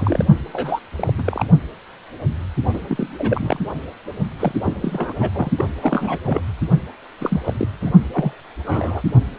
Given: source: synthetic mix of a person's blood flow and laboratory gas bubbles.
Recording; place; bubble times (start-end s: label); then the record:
Doppler ultrasound of blood flow; precordium
0.00-0.24 s: bubbles
0.52-0.79 s: bubbles
0.96-1.13 s: bubbles
1.18-1.46 s: bubbles
2.73-2.81 s: bubbles
2.88-3.07 s: bubbles
3.18-3.59 s: bubbles
4.39-4.52 s: bubbles
4.64-4.73 s: bubbles
4.81-5.13 s: bubbles
5.18-5.29 s: bubbles
5.33-5.50 s: bubbles
5.57-5.65 s: bubbles
5.81-6.18 s: bubbles
6.25-6.41 s: bubbles
7.21-7.40 s: bubbles
7.44-7.54 s: bubbles
7.58-7.67 s: bubbles
7.81-7.92 s: bubbles
8.12-8.32 s: bubbles
8.65-9.03 s: bubbles
From the record:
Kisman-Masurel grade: 232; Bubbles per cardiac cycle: several, 3 to 8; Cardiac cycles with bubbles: 50 to 99%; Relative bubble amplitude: moderate (0.250 to 0.450); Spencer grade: 3 (all of the cardiac periods contain showers or single bubble signals, but not dominating or overriding the cardiac motion signals); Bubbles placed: only in the low amplitude regions of the cardiac cycle